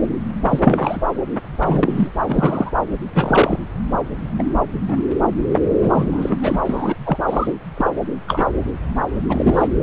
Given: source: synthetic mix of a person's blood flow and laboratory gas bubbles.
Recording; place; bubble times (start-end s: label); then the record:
Doppler ultrasound of blood flow; subclavian vein
0.48-0.60 s: bubbles
0.62-1.01 s: bubbles
1.59-2.09 s: bubbles
2.27-2.71 s: bubbles
3.13-3.58 s: bubbles
4.38-4.43 s: bubbles
4.88-5.05 s: bubbles
5.52-5.59 s: bubbles
5.82-6.37 s: bubbles
6.41-6.59 s: bubbles
6.65-6.96 s: bubbles
7.05-7.17 s: bubbles
7.28-7.53 s: bubbles
7.77-7.92 s: bubbles
8.27-8.45 s: bubbles
9.28-9.68 s: bubbles
From the record:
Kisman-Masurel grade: 243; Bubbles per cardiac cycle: several, 3 to 8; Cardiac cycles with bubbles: 100%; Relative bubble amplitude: loud (0.450 to 0.775); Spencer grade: 3 (all of the cardiac periods contain showers or single bubble signals, but not dominating or overriding the cardiac motion signals); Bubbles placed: anywhere in the cardiac cycle